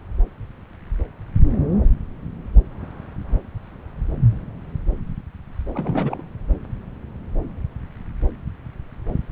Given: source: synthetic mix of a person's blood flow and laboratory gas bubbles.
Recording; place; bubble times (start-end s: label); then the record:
Doppler ultrasound of blood flow; subclavian vein
5.73-6.23 s: bubbles
From the record:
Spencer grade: 1 (occasional bubble signal discernible with the cardiac motion signal, with majority of cardiac periods free of bubbles); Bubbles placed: anywhere in the cardiac cycle